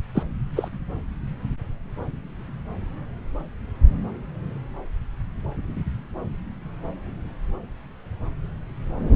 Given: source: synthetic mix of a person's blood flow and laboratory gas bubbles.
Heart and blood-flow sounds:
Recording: Doppler ultrasound of blood flow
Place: subclavian vein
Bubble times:
0.15-0.23 s: bubbles
0.56-0.68 s: bubbles
From the record:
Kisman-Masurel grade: 212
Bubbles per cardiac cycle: several, 3 to 8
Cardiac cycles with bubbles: 1 to 10%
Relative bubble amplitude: moderate (0.250 to 0.450)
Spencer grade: 1 (occasional bubble signal discernible with the cardiac motion signal, with majority of cardiac periods free of bubbles)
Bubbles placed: anywhere in the cardiac cycle

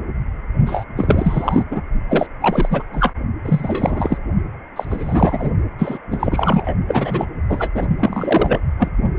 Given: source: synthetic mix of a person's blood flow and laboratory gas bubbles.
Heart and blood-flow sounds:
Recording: Doppler ultrasound of blood flow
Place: precordium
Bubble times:
0.66-0.84 s: bubbles
0.96-1.63 s: bubbles
1.71-1.81 s: bubbles
2.09-2.26 s: bubbles
2.41-2.82 s: bubbles
2.92-3.13 s: bubbles
3.45-4.18 s: bubbles
4.76-5.52 s: bubbles
5.79-5.99 s: bubbles
6.10-6.74 s: bubbles
6.88-7.25 s: bubbles
7.49-7.72 s: bubbles
7.75-7.87 s: bubbles
8.00-8.62 s: bubbles
8.79-8.89 s: bubbles
From the record:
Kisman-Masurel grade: 333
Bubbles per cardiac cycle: rolling drumbeat, 9 or more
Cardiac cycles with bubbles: 50 to 99%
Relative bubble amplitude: loud (0.450 to 0.775)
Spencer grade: 3 (all of the cardiac periods contain showers or single bubble signals, but not dominating or overriding the cardiac motion signals)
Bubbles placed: only in the low amplitude regions of the cardiac cycle

